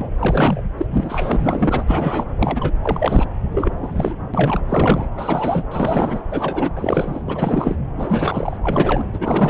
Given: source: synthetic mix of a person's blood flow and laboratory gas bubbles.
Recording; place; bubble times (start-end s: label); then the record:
Doppler ultrasound of blood flow; subclavian vein
0.00-0.10 s: bubbles
0.18-0.62 s: bubbles
0.77-0.86 s: bubbles
0.89-1.84 s: bubbles
1.88-2.30 s: bubbles
2.38-2.74 s: bubbles
2.81-3.27 s: bubbles
3.54-3.73 s: bubbles
3.81-4.14 s: bubbles
4.33-4.60 s: bubbles
4.69-5.06 s: bubbles
5.17-5.63 s: bubbles
5.71-6.22 s: bubbles
6.29-6.71 s: bubbles
6.76-7.21 s: bubbles
7.26-7.75 s: bubbles
7.96-8.57 s: bubbles
8.63-9.04 s: bubbles
9.13-9.50 s: bubbles
From the record:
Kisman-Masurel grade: 342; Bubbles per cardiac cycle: rolling drumbeat, 9 or more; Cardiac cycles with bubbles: 100%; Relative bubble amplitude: moderate (0.250 to 0.450); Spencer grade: 3 (all of the cardiac periods contain showers or single bubble signals, but not dominating or overriding the cardiac motion signals); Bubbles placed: anywhere in the cardiac cycle